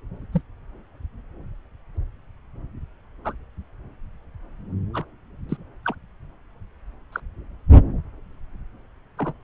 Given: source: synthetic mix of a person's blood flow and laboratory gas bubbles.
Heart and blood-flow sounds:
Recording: Doppler ultrasound of blood flow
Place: subclavian vein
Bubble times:
0.33-0.41 s: bubbles
3.25-3.33 s: bubbles
4.94-5.04 s: bubbles
5.49-5.57 s: bubbles
5.85-5.95 s: bubbles
7.12-7.20 s: bubbles
9.17-9.33 s: bubbles
From the record:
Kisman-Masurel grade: 121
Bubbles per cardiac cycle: 1 to 2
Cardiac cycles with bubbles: 10 to 50%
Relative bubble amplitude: barely perceptible (0.100 to 0.250)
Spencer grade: 2 (many but less than half of the cardiac periods contain bubble signals, singularly or in groups)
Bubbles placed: anywhere in the cardiac cycle

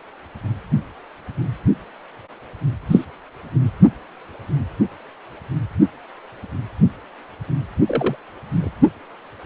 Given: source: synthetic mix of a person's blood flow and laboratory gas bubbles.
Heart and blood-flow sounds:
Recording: Doppler ultrasound of blood flow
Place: precordium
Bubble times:
2.90-3.05 s: bubbles
7.87-8.15 s: bubbles
8.52-8.69 s: bubbles
From the record:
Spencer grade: 2 (many but less than half of the cardiac periods contain bubble signals, singularly or in groups)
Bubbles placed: only in the low amplitude regions of the cardiac cycle

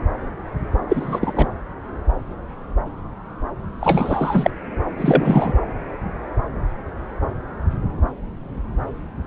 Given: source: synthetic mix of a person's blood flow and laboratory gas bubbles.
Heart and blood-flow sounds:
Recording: Doppler ultrasound of blood flow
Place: subclavian vein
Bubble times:
0.89-1.48 s: bubbles
3.81-4.50 s: bubbles
4.97-5.53 s: bubbles
From the record:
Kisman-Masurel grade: 223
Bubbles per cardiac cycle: several, 3 to 8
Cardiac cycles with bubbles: 10 to 50%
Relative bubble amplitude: loud (0.450 to 0.775)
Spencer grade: 2 (many but less than half of the cardiac periods contain bubble signals, singularly or in groups)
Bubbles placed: anywhere in the cardiac cycle

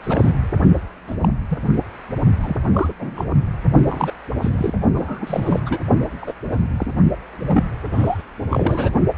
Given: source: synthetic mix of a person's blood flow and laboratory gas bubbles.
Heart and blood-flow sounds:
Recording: Doppler ultrasound of blood flow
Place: precordium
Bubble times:
0.03-0.30 s: bubbles
1.07-1.16 s: bubbles
1.21-1.29 s: bubbles
1.50-1.58 s: bubbles
2.41-2.56 s: bubbles
2.73-2.93 s: bubbles
2.98-3.25 s: bubbles
3.85-4.12 s: bubbles
4.42-4.74 s: bubbles
4.94-5.63 s: bubbles
5.65-5.81 s: bubbles
6.21-6.33 s: bubbles
6.51-6.56 s: bubbles
6.76-6.86 s: bubbles
7.46-7.69 s: bubbles
7.92-8.22 s: bubbles
8.49-8.90 s: bubbles
From the record:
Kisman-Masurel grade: 242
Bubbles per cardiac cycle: several, 3 to 8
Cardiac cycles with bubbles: 100%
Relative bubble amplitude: moderate (0.250 to 0.450)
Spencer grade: 3 (all of the cardiac periods contain showers or single bubble signals, but not dominating or overriding the cardiac motion signals)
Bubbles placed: only in the low amplitude regions of the cardiac cycle

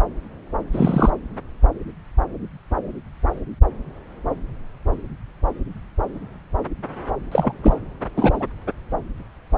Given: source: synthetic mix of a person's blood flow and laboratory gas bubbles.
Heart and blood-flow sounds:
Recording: Doppler ultrasound of blood flow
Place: subclavian vein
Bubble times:
0.72-1.09 s: bubbles
7.32-7.53 s: bubbles
7.63-7.75 s: bubbles
8.16-8.44 s: bubbles
From the record:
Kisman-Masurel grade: 223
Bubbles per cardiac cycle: several, 3 to 8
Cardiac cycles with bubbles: 10 to 50%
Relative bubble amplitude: loud (0.450 to 0.775)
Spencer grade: 2 (many but less than half of the cardiac periods contain bubble signals, singularly or in groups)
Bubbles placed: anywhere in the cardiac cycle

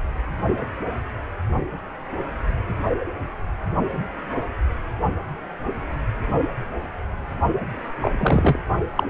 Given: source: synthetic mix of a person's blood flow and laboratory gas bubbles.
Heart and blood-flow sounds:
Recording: Doppler ultrasound of blood flow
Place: precordium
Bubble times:
8.02-8.12 s: bubbles
8.18-8.59 s: bubbles
8.96-9.04 s: bubbles
From the record:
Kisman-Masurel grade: 123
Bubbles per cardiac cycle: 1 to 2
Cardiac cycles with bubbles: 10 to 50%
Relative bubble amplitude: loud (0.450 to 0.775)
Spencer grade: 2 (many but less than half of the cardiac periods contain bubble signals, singularly or in groups)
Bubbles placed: only in the low amplitude regions of the cardiac cycle

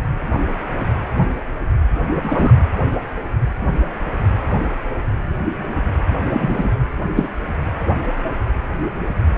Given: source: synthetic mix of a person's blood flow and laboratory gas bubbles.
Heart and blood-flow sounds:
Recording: Doppler ultrasound of blood flow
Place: precordium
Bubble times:
2.22-2.52 s: bubbles
6.29-6.71 s: bubbles
7.16-7.28 s: bubbles
From the record:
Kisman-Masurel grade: 123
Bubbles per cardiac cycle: 1 to 2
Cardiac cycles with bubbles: 10 to 50%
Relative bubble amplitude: loud (0.450 to 0.775)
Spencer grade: 2 (many but less than half of the cardiac periods contain bubble signals, singularly or in groups)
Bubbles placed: anywhere in the cardiac cycle

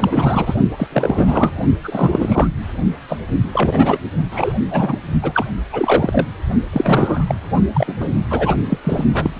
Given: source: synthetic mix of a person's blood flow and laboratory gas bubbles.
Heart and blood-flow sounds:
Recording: Doppler ultrasound of blood flow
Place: precordium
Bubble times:
0.00-0.55 s: bubbles
0.77-0.87 s: bubbles
0.92-1.52 s: bubbles
1.83-2.48 s: bubbles
3.08-3.19 s: bubbles
3.53-3.99 s: bubbles
4.32-4.53 s: bubbles
4.67-4.99 s: bubbles
5.22-5.45 s: bubbles
5.72-6.27 s: bubbles
6.72-7.35 s: bubbles
7.73-7.96 s: bubbles
8.00-8.08 s: bubbles
8.30-8.55 s: bubbles
8.69-8.78 s: bubbles
8.84-9.05 s: bubbles
9.13-9.30 s: bubbles
From the record:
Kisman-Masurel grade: 333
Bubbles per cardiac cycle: rolling drumbeat, 9 or more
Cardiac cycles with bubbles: 50 to 99%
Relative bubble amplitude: loud (0.450 to 0.775)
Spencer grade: 3 (all of the cardiac periods contain showers or single bubble signals, but not dominating or overriding the cardiac motion signals)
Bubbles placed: only in the low amplitude regions of the cardiac cycle

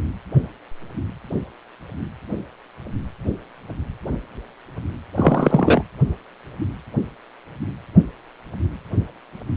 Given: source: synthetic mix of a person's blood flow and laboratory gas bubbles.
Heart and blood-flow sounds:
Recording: Doppler ultrasound of blood flow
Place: precordium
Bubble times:
5.14-5.82 s: bubbles
From the record:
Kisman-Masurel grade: 213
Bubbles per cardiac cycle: several, 3 to 8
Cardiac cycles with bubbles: 1 to 10%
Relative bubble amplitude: loud (0.450 to 0.775)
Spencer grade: 1 (occasional bubble signal discernible with the cardiac motion signal, with majority of cardiac periods free of bubbles)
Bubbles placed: anywhere in the cardiac cycle

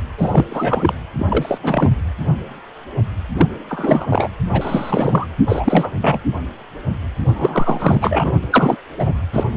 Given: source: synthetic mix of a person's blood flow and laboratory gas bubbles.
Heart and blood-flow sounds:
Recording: Doppler ultrasound of blood flow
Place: precordium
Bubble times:
0.17-0.46 s: bubbles
0.49-0.94 s: bubbles
1.18-1.58 s: bubbles
1.63-1.90 s: bubbles
3.38-3.49 s: bubbles
3.69-4.07 s: bubbles
4.09-4.29 s: bubbles
4.52-5.27 s: bubbles
5.45-5.92 s: bubbles
6.01-6.18 s: bubbles
7.33-8.33 s: bubbles
8.44-8.47 s: bubbles
8.50-8.77 s: bubbles
8.98-9.14 s: bubbles
9.33-9.44 s: bubbles
9.51-9.57 s: bubbles
From the record:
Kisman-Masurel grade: 333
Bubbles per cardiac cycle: rolling drumbeat, 9 or more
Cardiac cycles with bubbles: 50 to 99%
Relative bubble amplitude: loud (0.450 to 0.775)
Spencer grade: 3 (all of the cardiac periods contain showers or single bubble signals, but not dominating or overriding the cardiac motion signals)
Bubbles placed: anywhere in the cardiac cycle

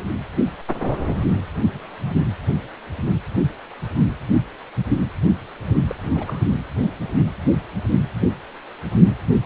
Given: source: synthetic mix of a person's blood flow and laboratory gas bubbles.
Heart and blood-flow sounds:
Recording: Doppler ultrasound of blood flow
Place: precordium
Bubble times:
5.89-5.95 s: bubbles
6.15-6.39 s: bubbles
From the record:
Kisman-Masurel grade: 211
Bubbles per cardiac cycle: several, 3 to 8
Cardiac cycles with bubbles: 1 to 10%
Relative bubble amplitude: barely perceptible (0.100 to 0.250)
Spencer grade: 1 (occasional bubble signal discernible with the cardiac motion signal, with majority of cardiac periods free of bubbles)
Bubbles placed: only in the low amplitude regions of the cardiac cycle

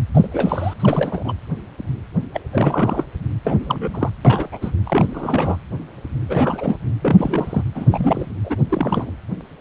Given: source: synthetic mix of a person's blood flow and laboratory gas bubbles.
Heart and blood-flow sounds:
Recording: Doppler ultrasound of blood flow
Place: precordium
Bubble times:
0.14-0.27 s: bubbles
0.32-0.74 s: bubbles
0.78-1.33 s: bubbles
2.33-2.40 s: bubbles
2.52-3.04 s: bubbles
3.44-4.10 s: bubbles
4.25-4.49 s: bubbles
4.52-4.71 s: bubbles
4.83-5.56 s: bubbles
6.29-6.77 s: bubbles
7.01-7.62 s: bubbles
7.75-8.36 s: bubbles
8.44-8.56 s: bubbles
8.69-9.14 s: bubbles
From the record:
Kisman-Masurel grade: 332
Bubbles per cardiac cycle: rolling drumbeat, 9 or more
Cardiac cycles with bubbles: 50 to 99%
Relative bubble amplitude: moderate (0.250 to 0.450)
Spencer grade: 3 (all of the cardiac periods contain showers or single bubble signals, but not dominating or overriding the cardiac motion signals)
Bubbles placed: anywhere in the cardiac cycle

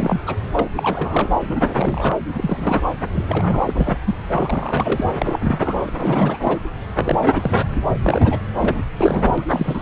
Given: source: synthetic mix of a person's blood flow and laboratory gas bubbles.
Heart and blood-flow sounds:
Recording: Doppler ultrasound of blood flow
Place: subclavian vein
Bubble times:
0.00-0.20 s: bubbles
0.27-0.35 s: bubbles
0.53-0.68 s: bubbles
0.75-1.29 s: bubbles
1.40-2.17 s: bubbles
2.34-2.81 s: bubbles
3.12-3.25 s: bubbles
3.28-3.98 s: bubbles
4.06-4.15 s: bubbles
4.32-5.04 s: bubbles
5.20-5.39 s: bubbles
5.43-5.91 s: bubbles
6.00-6.39 s: bubbles
6.45-6.58 s: bubbles
6.95-7.65 s: bubbles
8.06-8.38 s: bubbles
8.54-8.83 s: bubbles
8.99-9.82 s: bubbles
From the record:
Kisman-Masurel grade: 332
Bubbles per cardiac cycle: rolling drumbeat, 9 or more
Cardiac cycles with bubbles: 50 to 99%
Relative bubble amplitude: moderate (0.250 to 0.450)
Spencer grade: 3 (all of the cardiac periods contain showers or single bubble signals, but not dominating or overriding the cardiac motion signals)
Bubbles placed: anywhere in the cardiac cycle

